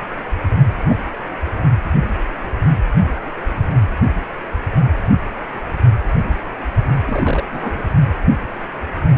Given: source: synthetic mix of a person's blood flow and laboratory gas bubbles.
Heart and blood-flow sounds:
Doppler ultrasound of blood flow; precordium
0.89-0.97 s: bubbles
7.05-7.44 s: bubbles
7.51-7.81 s: bubbles
From the record:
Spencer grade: 2 (many but less than half of the cardiac periods contain bubble signals, singularly or in groups); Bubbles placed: only in the low amplitude regions of the cardiac cycle

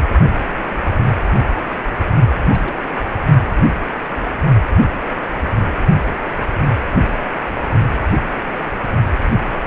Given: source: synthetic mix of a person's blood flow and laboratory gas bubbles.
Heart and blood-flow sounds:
Doppler ultrasound of blood flow; precordium
2.43-2.76 s: bubbles
8.62-8.71 s: bubbles
From the record:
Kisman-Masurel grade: 121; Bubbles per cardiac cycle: 1 to 2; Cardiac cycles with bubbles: 10 to 50%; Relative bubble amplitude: barely perceptible (0.100 to 0.250); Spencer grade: 2 (many but less than half of the cardiac periods contain bubble signals, singularly or in groups); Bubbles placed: only in the low amplitude regions of the cardiac cycle

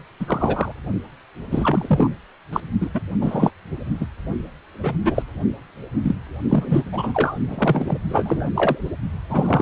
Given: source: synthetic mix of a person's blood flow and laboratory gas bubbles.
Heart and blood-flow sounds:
Doppler ultrasound of blood flow; precordium
0.20-0.72 s: bubbles
1.51-2.10 s: bubbles
2.53-2.60 s: bubbles
2.81-2.90 s: bubbles
2.94-3.00 s: bubbles
3.21-3.51 s: bubbles
4.00-4.07 s: bubbles
4.73-4.95 s: bubbles
5.04-5.23 s: bubbles
6.03-6.15 s: bubbles
6.49-6.83 s: bubbles
6.91-7.37 s: bubbles
7.48-7.98 s: bubbles
8.09-8.50 s: bubbles
8.54-8.78 s: bubbles
9.29-9.62 s: bubbles
From the record:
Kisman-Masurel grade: 233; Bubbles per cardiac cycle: several, 3 to 8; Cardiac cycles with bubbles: 50 to 99%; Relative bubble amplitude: loud (0.450 to 0.775); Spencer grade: 3 (all of the cardiac periods contain showers or single bubble signals, but not dominating or overriding the cardiac motion signals); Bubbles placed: only in the low amplitude regions of the cardiac cycle

